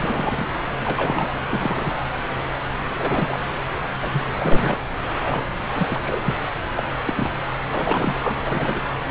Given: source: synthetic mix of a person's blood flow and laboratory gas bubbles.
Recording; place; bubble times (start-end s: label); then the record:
Doppler ultrasound of blood flow; subclavian vein
0.00-0.47 s: bubbles
0.80-1.31 s: bubbles
1.50-1.97 s: bubbles
2.98-3.40 s: bubbles
4.01-4.25 s: bubbles
4.35-4.77 s: bubbles
5.23-5.51 s: bubbles
5.75-6.36 s: bubbles
6.75-6.83 s: bubbles
7.05-7.13 s: bubbles
7.17-7.31 s: bubbles
7.72-8.33 s: bubbles
8.46-8.83 s: bubbles
From the record:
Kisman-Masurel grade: 242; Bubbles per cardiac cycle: several, 3 to 8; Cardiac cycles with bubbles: 100%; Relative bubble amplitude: moderate (0.250 to 0.450); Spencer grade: 3 (all of the cardiac periods contain showers or single bubble signals, but not dominating or overriding the cardiac motion signals); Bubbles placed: anywhere in the cardiac cycle